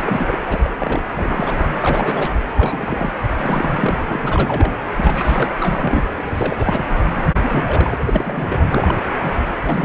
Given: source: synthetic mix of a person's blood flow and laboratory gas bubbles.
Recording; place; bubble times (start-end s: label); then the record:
Doppler ultrasound of blood flow; precordium
0.00-0.38 s: bubbles
0.49-0.60 s: bubbles
0.64-1.02 s: bubbles
1.15-1.67 s: bubbles
1.79-2.31 s: bubbles
2.56-3.12 s: bubbles
3.36-4.73 s: bubbles
4.96-5.52 s: bubbles
5.60-6.12 s: bubbles
6.34-6.85 s: bubbles
7.13-7.29 s: bubbles
7.33-7.40 s: bubbles
7.42-7.96 s: bubbles
7.99-8.64 s: bubbles
8.69-8.95 s: bubbles
9.19-9.38 s: bubbles
9.64-9.85 s: bubbles
From the record:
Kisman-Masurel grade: 342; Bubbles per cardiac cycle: rolling drumbeat, 9 or more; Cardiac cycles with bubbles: 100%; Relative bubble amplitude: moderate (0.250 to 0.450); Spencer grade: 3 (all of the cardiac periods contain showers or single bubble signals, but not dominating or overriding the cardiac motion signals); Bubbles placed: anywhere in the cardiac cycle